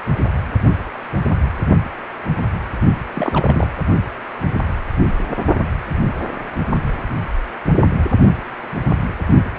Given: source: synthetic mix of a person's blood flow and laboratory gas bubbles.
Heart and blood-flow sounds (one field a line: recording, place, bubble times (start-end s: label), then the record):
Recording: Doppler ultrasound of blood flow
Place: precordium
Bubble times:
3.15-3.71 s: bubbles
From the record:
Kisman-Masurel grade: 211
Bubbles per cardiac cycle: several, 3 to 8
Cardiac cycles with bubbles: 1 to 10%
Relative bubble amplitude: barely perceptible (0.100 to 0.250)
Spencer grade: 1 (occasional bubble signal discernible with the cardiac motion signal, with majority of cardiac periods free of bubbles)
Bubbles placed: only in the low amplitude regions of the cardiac cycle